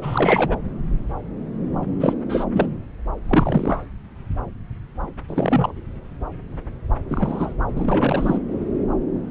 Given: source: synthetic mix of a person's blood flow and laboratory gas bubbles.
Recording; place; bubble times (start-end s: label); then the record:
Doppler ultrasound of blood flow; subclavian vein
0.02-0.56 s: bubbles
2.00-2.14 s: bubbles
2.29-2.44 s: bubbles
2.52-2.67 s: bubbles
3.27-3.82 s: bubbles
5.28-5.72 s: bubbles
7.09-7.53 s: bubbles
7.75-8.38 s: bubbles
From the record:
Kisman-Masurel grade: 232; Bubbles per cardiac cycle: several, 3 to 8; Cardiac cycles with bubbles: 50 to 99%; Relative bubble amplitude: moderate (0.250 to 0.450); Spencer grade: 3 (all of the cardiac periods contain showers or single bubble signals, but not dominating or overriding the cardiac motion signals); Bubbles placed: anywhere in the cardiac cycle